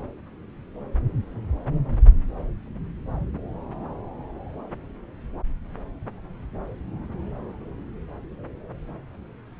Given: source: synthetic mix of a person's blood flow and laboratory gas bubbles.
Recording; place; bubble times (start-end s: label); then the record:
Doppler ultrasound of blood flow; subclavian vein
no bubbles
From the record:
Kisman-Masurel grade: 000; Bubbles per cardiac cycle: 0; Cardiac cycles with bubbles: 0%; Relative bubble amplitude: no bubbles discernible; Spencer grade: 0 (complete lack of bubble signals)